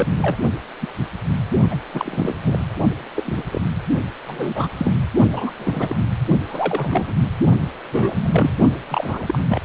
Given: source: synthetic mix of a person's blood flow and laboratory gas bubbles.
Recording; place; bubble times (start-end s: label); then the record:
Doppler ultrasound of blood flow; precordium
0.00-0.12 s: bubbles
0.16-0.36 s: bubbles
0.81-0.88 s: bubbles
1.71-1.75 s: bubbles
1.94-2.34 s: bubbles
2.43-2.65 s: bubbles
3.15-3.44 s: bubbles
3.52-3.62 s: bubbles
4.26-4.70 s: bubbles
4.78-4.92 s: bubbles
5.32-5.53 s: bubbles
5.58-5.96 s: bubbles
6.49-7.13 s: bubbles
7.91-8.59 s: bubbles
8.89-9.41 s: bubbles
9.48-9.62 s: bubbles
From the record:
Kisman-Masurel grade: 232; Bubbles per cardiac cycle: several, 3 to 8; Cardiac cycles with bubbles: 50 to 99%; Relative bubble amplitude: moderate (0.250 to 0.450); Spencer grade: 3 (all of the cardiac periods contain showers or single bubble signals, but not dominating or overriding the cardiac motion signals); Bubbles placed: only in the low amplitude regions of the cardiac cycle